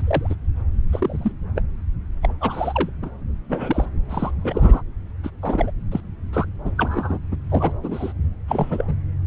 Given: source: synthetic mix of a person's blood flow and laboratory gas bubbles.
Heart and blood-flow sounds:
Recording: Doppler ultrasound of blood flow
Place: subclavian vein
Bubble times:
0.00-0.34 s: bubbles
0.92-1.32 s: bubbles
1.56-1.62 s: bubbles
2.22-2.35 s: bubbles
2.40-2.90 s: bubbles
3.02-3.10 s: bubbles
3.48-3.86 s: bubbles
4.09-4.31 s: bubbles
4.38-4.82 s: bubbles
5.23-5.30 s: bubbles
5.42-5.71 s: bubbles
5.91-6.01 s: bubbles
6.33-6.46 s: bubbles
6.64-6.71 s: bubbles
6.76-7.18 s: bubbles
7.31-7.37 s: bubbles
7.49-7.72 s: bubbles
7.82-8.12 s: bubbles
8.47-8.84 s: bubbles
8.87-8.94 s: bubbles
From the record:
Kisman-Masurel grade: 242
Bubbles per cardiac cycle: several, 3 to 8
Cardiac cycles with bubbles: 100%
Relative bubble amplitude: moderate (0.250 to 0.450)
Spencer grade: 3 (all of the cardiac periods contain showers or single bubble signals, but not dominating or overriding the cardiac motion signals)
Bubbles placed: anywhere in the cardiac cycle

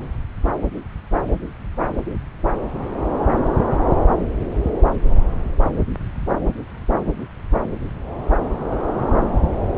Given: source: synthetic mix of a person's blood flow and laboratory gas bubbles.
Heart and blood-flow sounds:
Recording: Doppler ultrasound of blood flow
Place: subclavian vein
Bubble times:
no bubbles
From the record:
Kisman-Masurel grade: 000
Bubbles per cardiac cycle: 0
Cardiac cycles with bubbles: 0%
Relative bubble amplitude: no bubbles discernible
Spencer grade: 0 (complete lack of bubble signals)

